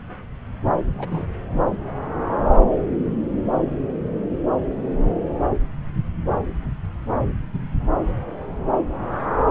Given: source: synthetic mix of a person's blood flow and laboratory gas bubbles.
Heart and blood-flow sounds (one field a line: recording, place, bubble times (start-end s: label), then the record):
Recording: Doppler ultrasound of blood flow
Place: subclavian vein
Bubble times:
0.98-1.27 s: bubbles
From the record:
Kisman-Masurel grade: 112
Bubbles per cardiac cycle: 1 to 2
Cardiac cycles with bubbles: 1 to 10%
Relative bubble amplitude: moderate (0.250 to 0.450)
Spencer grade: 1 (occasional bubble signal discernible with the cardiac motion signal, with majority of cardiac periods free of bubbles)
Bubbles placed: anywhere in the cardiac cycle